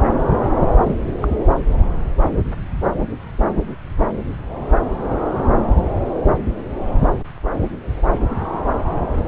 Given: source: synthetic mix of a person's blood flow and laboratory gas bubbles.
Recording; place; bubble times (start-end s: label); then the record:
Doppler ultrasound of blood flow; subclavian vein
0.83-0.95 s: bubbles
1.22-1.27 s: bubbles
From the record:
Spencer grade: 1 (occasional bubble signal discernible with the cardiac motion signal, with majority of cardiac periods free of bubbles); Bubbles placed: anywhere in the cardiac cycle